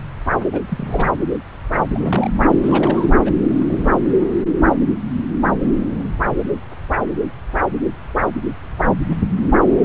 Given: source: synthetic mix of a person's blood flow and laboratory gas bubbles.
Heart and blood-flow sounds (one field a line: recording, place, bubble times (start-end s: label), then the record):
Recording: Doppler ultrasound of blood flow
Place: subclavian vein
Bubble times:
0.52-0.59 s: bubbles
0.68-1.11 s: bubbles
1.94-2.31 s: bubbles
2.62-3.13 s: bubbles
3.25-3.31 s: bubbles
3.43-3.98 s: bubbles
4.06-4.13 s: bubbles
From the record:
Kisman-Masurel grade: 222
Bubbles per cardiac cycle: several, 3 to 8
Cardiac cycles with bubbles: 10 to 50%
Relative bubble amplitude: moderate (0.250 to 0.450)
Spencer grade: 2 (many but less than half of the cardiac periods contain bubble signals, singularly or in groups)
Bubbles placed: anywhere in the cardiac cycle